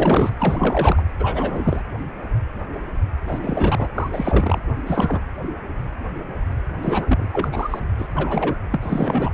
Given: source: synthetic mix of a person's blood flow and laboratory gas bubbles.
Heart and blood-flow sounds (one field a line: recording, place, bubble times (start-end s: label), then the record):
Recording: Doppler ultrasound of blood flow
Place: precordium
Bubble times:
0.00-0.33 s: bubbles
0.39-1.04 s: bubbles
1.19-1.82 s: bubbles
3.27-3.87 s: bubbles
3.94-4.62 s: bubbles
4.86-5.22 s: bubbles
6.82-7.28 s: bubbles
7.32-7.48 s: bubbles
7.52-7.79 s: bubbles
7.98-8.09 s: bubbles
8.14-8.58 s: bubbles
8.70-8.77 s: bubbles
8.80-9.33 s: bubbles
From the record:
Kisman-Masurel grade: 333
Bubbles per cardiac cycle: rolling drumbeat, 9 or more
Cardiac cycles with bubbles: 50 to 99%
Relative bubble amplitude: loud (0.450 to 0.775)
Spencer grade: 3 (all of the cardiac periods contain showers or single bubble signals, but not dominating or overriding the cardiac motion signals)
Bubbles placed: anywhere in the cardiac cycle